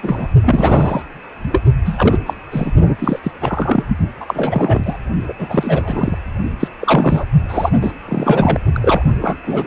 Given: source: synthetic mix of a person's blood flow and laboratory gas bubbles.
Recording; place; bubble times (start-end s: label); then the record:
Doppler ultrasound of blood flow; precordium
0.03-0.27 s: bubbles
0.42-1.02 s: bubbles
1.52-1.65 s: bubbles
1.85-2.19 s: bubbles
2.26-2.33 s: bubbles
2.51-2.72 s: bubbles
2.99-3.20 s: bubbles
3.23-3.84 s: bubbles
4.21-4.96 s: bubbles
5.27-5.33 s: bubbles
5.38-6.18 s: bubbles
6.59-6.68 s: bubbles
6.79-7.25 s: bubbles
7.48-7.70 s: bubbles
7.81-7.92 s: bubbles
8.08-8.60 s: bubbles
8.72-9.12 s: bubbles
9.21-9.37 s: bubbles
9.44-9.66 s: bubbles
From the record:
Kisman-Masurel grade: 343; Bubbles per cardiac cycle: rolling drumbeat, 9 or more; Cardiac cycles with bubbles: 100%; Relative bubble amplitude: loud (0.450 to 0.775); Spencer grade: 3 (all of the cardiac periods contain showers or single bubble signals, but not dominating or overriding the cardiac motion signals); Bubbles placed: only in the low amplitude regions of the cardiac cycle